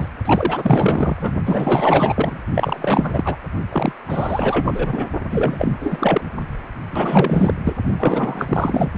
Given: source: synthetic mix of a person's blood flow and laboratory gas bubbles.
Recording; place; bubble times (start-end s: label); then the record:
Doppler ultrasound of blood flow; precordium
0.00-0.08 s: bubbles
0.24-1.35 s: bubbles
1.45-2.38 s: bubbles
2.54-3.36 s: bubbles
3.72-3.92 s: bubbles
4.08-5.07 s: bubbles
5.30-5.78 s: bubbles
5.81-6.21 s: bubbles
6.91-7.54 s: bubbles
7.65-7.74 s: bubbles
7.97-8.91 s: bubbles
From the record:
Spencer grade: 4 (maximum detectable bubble signal sounding continuously throughout systole and diastole of every cardiac period, and overriding the amplitude of the normal cardiac signals); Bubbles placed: only in the low amplitude regions of the cardiac cycle